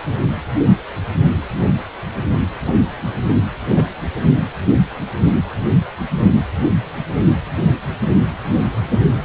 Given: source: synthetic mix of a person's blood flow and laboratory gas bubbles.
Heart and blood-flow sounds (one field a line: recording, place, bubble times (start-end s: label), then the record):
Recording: Doppler ultrasound of blood flow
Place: precordium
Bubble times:
3.70-3.88 s: bubbles
From the record:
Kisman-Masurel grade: 112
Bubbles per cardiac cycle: 1 to 2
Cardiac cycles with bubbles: 1 to 10%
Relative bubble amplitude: moderate (0.250 to 0.450)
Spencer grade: 1 (occasional bubble signal discernible with the cardiac motion signal, with majority of cardiac periods free of bubbles)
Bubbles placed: anywhere in the cardiac cycle